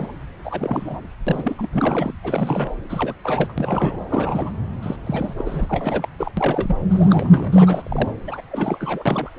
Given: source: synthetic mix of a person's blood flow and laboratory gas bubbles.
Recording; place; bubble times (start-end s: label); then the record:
Doppler ultrasound of blood flow; subclavian vein
0.00-0.12 s: bubbles
0.44-1.08 s: bubbles
1.27-1.56 s: bubbles
1.59-1.69 s: bubbles
1.72-2.13 s: bubbles
2.23-2.70 s: bubbles
2.89-3.15 s: bubbles
3.25-3.54 s: bubbles
3.58-4.00 s: bubbles
4.10-4.53 s: bubbles
4.83-4.96 s: bubbles
5.06-5.34 s: bubbles
5.38-5.66 s: bubbles
5.69-6.08 s: bubbles
6.19-6.32 s: bubbles
6.37-6.77 s: bubbles
6.90-8.10 s: bubbles
8.27-8.41 s: bubbles
8.49-9.29 s: bubbles
From the record:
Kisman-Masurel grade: 342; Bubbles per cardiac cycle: rolling drumbeat, 9 or more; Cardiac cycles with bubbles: 100%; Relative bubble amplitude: moderate (0.250 to 0.450); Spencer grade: 3 (all of the cardiac periods contain showers or single bubble signals, but not dominating or overriding the cardiac motion signals); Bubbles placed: anywhere in the cardiac cycle